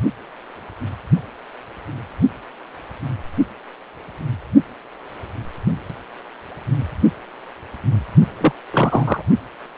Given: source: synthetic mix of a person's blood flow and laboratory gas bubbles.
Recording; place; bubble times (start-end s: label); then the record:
Doppler ultrasound of blood flow; precordium
8.41-8.53 s: bubbles
8.72-9.22 s: bubbles
From the record:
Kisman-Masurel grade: 212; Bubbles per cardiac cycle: several, 3 to 8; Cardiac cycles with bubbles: 1 to 10%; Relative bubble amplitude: moderate (0.250 to 0.450); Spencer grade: 1 (occasional bubble signal discernible with the cardiac motion signal, with majority of cardiac periods free of bubbles); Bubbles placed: only in the low amplitude regions of the cardiac cycle